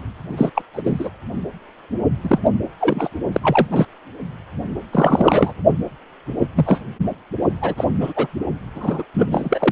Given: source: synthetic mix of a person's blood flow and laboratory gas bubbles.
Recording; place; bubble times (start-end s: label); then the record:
Doppler ultrasound of blood flow; precordium
0.28-0.50 s: bubbles
0.54-0.62 s: bubbles
0.73-1.10 s: bubbles
2.22-2.39 s: bubbles
2.45-2.50 s: bubbles
2.80-3.09 s: bubbles
3.33-3.68 s: bubbles
3.70-3.85 s: bubbles
4.92-5.53 s: bubbles
6.39-6.47 s: bubbles
6.55-6.80 s: bubbles
7.61-7.74 s: bubbles
7.77-7.84 s: bubbles
8.00-8.12 s: bubbles
8.15-8.27 s: bubbles
8.74-9.03 s: bubbles
9.13-9.27 s: bubbles
9.30-9.72 s: bubbles
From the record:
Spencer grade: 3 (all of the cardiac periods contain showers or single bubble signals, but not dominating or overriding the cardiac motion signals); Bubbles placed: only in the low amplitude regions of the cardiac cycle